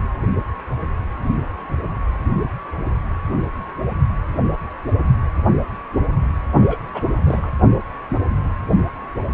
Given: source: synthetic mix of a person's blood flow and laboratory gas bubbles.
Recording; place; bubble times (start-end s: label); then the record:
Doppler ultrasound of blood flow; precordium
6.54-6.78 s: bubbles
6.93-7.01 s: bubbles
7.13-7.52 s: bubbles
From the record:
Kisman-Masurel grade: 211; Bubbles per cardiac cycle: several, 3 to 8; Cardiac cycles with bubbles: 1 to 10%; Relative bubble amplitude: barely perceptible (0.100 to 0.250); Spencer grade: 1 (occasional bubble signal discernible with the cardiac motion signal, with majority of cardiac periods free of bubbles); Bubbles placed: anywhere in the cardiac cycle